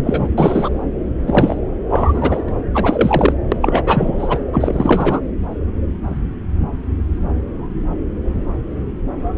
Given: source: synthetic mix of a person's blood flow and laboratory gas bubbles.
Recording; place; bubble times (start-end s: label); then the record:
Doppler ultrasound of blood flow; subclavian vein
0.04-0.28 s: bubbles
0.38-0.69 s: bubbles
1.22-1.60 s: bubbles
1.89-2.44 s: bubbles
2.48-2.52 s: bubbles
2.74-3.33 s: bubbles
3.52-3.56 s: bubbles
3.61-3.83 s: bubbles
3.86-4.39 s: bubbles
4.53-5.20 s: bubbles
From the record:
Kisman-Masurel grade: 333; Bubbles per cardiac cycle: rolling drumbeat, 9 or more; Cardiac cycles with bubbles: 50 to 99%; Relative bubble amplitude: loud (0.450 to 0.775); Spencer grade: 3 (all of the cardiac periods contain showers or single bubble signals, but not dominating or overriding the cardiac motion signals); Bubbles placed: anywhere in the cardiac cycle